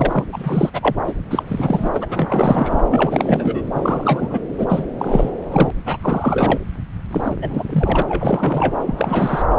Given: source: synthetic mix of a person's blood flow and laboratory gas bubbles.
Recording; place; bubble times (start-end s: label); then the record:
Doppler ultrasound of blood flow; subclavian vein
0.00-0.26 s: bubbles
0.32-0.70 s: bubbles
0.73-0.96 s: bubbles
1.06-1.12 s: bubbles
1.30-1.42 s: bubbles
1.48-2.06 s: bubbles
2.10-2.79 s: bubbles
2.90-3.62 s: bubbles
3.74-4.39 s: bubbles
4.58-4.87 s: bubbles
4.99-5.31 s: bubbles
5.51-5.71 s: bubbles
5.85-5.97 s: bubbles
6.01-6.60 s: bubbles
7.11-7.34 s: bubbles
7.42-8.03 s: bubbles
8.07-8.79 s: bubbles
8.86-9.43 s: bubbles
From the record:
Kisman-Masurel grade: 343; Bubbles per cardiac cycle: rolling drumbeat, 9 or more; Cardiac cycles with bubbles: 100%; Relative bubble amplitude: loud (0.450 to 0.775); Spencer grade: 3 (all of the cardiac periods contain showers or single bubble signals, but not dominating or overriding the cardiac motion signals); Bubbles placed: anywhere in the cardiac cycle